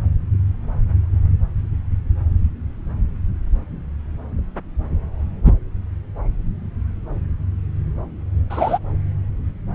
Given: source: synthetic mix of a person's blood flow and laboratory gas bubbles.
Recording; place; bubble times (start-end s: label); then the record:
Doppler ultrasound of blood flow; subclavian vein
8.50-8.79 s: bubbles
From the record:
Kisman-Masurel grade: 113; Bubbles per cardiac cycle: 1 to 2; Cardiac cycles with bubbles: 1 to 10%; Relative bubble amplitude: loud (0.450 to 0.775); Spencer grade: 1 (occasional bubble signal discernible with the cardiac motion signal, with majority of cardiac periods free of bubbles); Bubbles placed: anywhere in the cardiac cycle